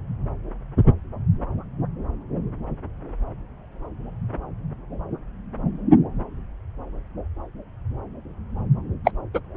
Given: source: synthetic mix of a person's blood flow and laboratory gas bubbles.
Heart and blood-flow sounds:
Doppler ultrasound of blood flow; subclavian vein
9.04-9.12 s: bubbles
9.34-9.40 s: bubbles
From the record:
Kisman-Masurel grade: 213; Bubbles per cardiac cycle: several, 3 to 8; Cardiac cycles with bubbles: 1 to 10%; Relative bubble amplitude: loud (0.450 to 0.775); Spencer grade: 1 (occasional bubble signal discernible with the cardiac motion signal, with majority of cardiac periods free of bubbles); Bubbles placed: anywhere in the cardiac cycle

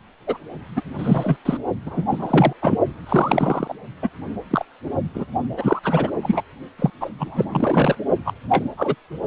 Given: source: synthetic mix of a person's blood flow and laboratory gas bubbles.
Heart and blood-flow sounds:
Doppler ultrasound of blood flow; precordium
0.27-0.38 s: bubbles
0.76-0.82 s: bubbles
0.98-1.36 s: bubbles
1.45-1.57 s: bubbles
1.85-2.53 s: bubbles
2.61-2.79 s: bubbles
3.06-3.73 s: bubbles
4.02-4.10 s: bubbles
4.50-4.65 s: bubbles
5.14-5.26 s: bubbles
5.56-5.79 s: bubbles
5.83-6.11 s: bubbles
6.22-6.41 s: bubbles
6.79-6.90 s: bubbles
7.00-7.10 s: bubbles
7.19-7.45 s: bubbles
7.52-7.96 s: bubbles
8.25-8.34 s: bubbles
8.49-8.65 s: bubbles
8.77-8.95 s: bubbles
From the record:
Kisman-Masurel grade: 243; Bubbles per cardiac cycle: several, 3 to 8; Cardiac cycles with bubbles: 100%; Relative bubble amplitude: loud (0.450 to 0.775); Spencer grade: 3 (all of the cardiac periods contain showers or single bubble signals, but not dominating or overriding the cardiac motion signals); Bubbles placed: only in the low amplitude regions of the cardiac cycle

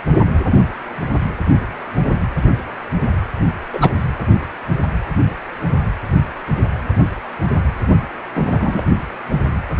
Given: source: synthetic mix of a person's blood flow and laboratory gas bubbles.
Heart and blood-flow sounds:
Doppler ultrasound of blood flow; precordium
3.73-3.90 s: bubbles
8.34-8.81 s: bubbles
From the record:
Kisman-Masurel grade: 123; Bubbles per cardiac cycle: 1 to 2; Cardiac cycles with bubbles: 10 to 50%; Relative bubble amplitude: loud (0.450 to 0.775); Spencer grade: 2 (many but less than half of the cardiac periods contain bubble signals, singularly or in groups); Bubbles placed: anywhere in the cardiac cycle

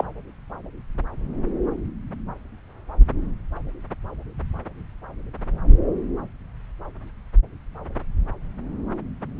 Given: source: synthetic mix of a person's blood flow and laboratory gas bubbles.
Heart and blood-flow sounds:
Doppler ultrasound of blood flow; subclavian vein
0.00-0.05 s: bubbles
From the record:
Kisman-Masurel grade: 212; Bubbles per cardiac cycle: several, 3 to 8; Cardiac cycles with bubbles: 1 to 10%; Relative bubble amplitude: moderate (0.250 to 0.450); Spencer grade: 1 (occasional bubble signal discernible with the cardiac motion signal, with majority of cardiac periods free of bubbles); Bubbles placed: anywhere in the cardiac cycle

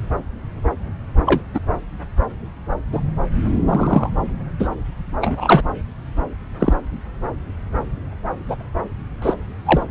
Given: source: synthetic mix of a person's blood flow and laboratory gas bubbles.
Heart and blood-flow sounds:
Doppler ultrasound of blood flow; subclavian vein
1.25-1.42 s: bubbles
1.54-1.59 s: bubbles
2.92-3.00 s: bubbles
3.69-4.10 s: bubbles
4.59-4.69 s: bubbles
5.21-5.62 s: bubbles
6.59-6.73 s: bubbles
8.49-8.57 s: bubbles
9.22-9.34 s: bubbles
9.65-9.83 s: bubbles
From the record:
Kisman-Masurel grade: 123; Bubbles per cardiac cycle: 1 to 2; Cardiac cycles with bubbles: 10 to 50%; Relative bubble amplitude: loud (0.450 to 0.775); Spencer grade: 2 (many but less than half of the cardiac periods contain bubble signals, singularly or in groups); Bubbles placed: anywhere in the cardiac cycle

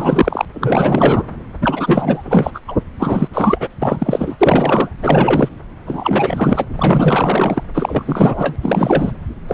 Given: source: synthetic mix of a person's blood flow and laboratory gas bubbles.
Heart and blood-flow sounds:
Doppler ultrasound of blood flow; subclavian vein
0.00-0.45 s: bubbles
0.53-1.23 s: bubbles
1.61-2.50 s: bubbles
2.54-2.59 s: bubbles
2.67-2.77 s: bubbles
2.99-3.27 s: bubbles
3.33-3.68 s: bubbles
3.82-4.36 s: bubbles
4.41-4.90 s: bubbles
5.00-5.49 s: bubbles
5.86-6.66 s: bubbles
6.76-7.64 s: bubbles
7.74-8.56 s: bubbles
8.62-9.12 s: bubbles
9.47-9.54 s: bubbles
From the record:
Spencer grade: 4 (maximum detectable bubble signal sounding continuously throughout systole and diastole of every cardiac period, and overriding the amplitude of the normal cardiac signals); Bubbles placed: anywhere in the cardiac cycle

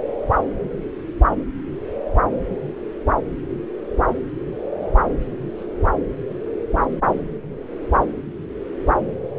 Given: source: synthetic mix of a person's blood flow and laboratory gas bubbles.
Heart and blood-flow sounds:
Doppler ultrasound of blood flow; subclavian vein
4.71-4.92 s: bubbles
5.58-5.65 s: bubbles
9.27-9.31 s: bubbles
From the record:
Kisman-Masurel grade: 121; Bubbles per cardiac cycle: 1 to 2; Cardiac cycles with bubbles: 10 to 50%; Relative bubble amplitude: barely perceptible (0.100 to 0.250); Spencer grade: 2 (many but less than half of the cardiac periods contain bubble signals, singularly or in groups); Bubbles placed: anywhere in the cardiac cycle

